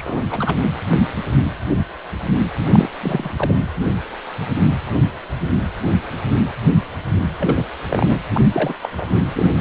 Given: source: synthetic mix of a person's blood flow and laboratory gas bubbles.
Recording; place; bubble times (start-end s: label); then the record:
Doppler ultrasound of blood flow; precordium
0.00-0.23 s: bubbles
0.31-0.57 s: bubbles
2.71-2.89 s: bubbles
3.00-3.33 s: bubbles
3.36-3.54 s: bubbles
7.38-7.68 s: bubbles
7.88-8.19 s: bubbles
8.33-8.41 s: bubbles
8.52-8.74 s: bubbles
8.82-8.89 s: bubbles
8.92-9.21 s: bubbles
9.32-9.52 s: bubbles
From the record:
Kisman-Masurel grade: 222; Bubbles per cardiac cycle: several, 3 to 8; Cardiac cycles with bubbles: 10 to 50%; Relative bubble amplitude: moderate (0.250 to 0.450); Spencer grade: 2 (many but less than half of the cardiac periods contain bubble signals, singularly or in groups); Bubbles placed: anywhere in the cardiac cycle